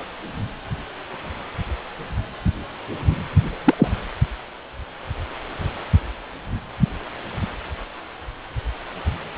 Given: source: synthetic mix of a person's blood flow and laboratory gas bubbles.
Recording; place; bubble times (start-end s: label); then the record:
Doppler ultrasound of blood flow; precordium
3.64-3.74 s: bubbles
3.78-3.88 s: bubbles
From the record:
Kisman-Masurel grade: 113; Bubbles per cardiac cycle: 1 to 2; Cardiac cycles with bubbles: 1 to 10%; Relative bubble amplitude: loud (0.450 to 0.775); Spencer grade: 1 (occasional bubble signal discernible with the cardiac motion signal, with majority of cardiac periods free of bubbles); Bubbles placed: anywhere in the cardiac cycle